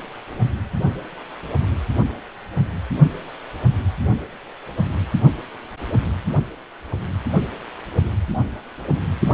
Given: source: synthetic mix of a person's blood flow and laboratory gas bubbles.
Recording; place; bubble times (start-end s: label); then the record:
Doppler ultrasound of blood flow; precordium
no bubbles
From the record:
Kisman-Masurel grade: 000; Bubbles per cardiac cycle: 0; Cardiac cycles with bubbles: 0%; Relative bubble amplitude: no bubbles discernible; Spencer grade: 0 (complete lack of bubble signals)